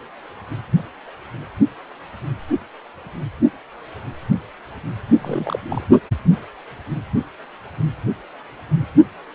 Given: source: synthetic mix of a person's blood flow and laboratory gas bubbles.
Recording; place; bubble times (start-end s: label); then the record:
Doppler ultrasound of blood flow; precordium
5.21-5.59 s: bubbles
5.69-5.87 s: bubbles
From the record:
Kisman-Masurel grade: 211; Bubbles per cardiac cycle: several, 3 to 8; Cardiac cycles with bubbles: 1 to 10%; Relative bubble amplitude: barely perceptible (0.100 to 0.250); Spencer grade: 1 (occasional bubble signal discernible with the cardiac motion signal, with majority of cardiac periods free of bubbles); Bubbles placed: only in the low amplitude regions of the cardiac cycle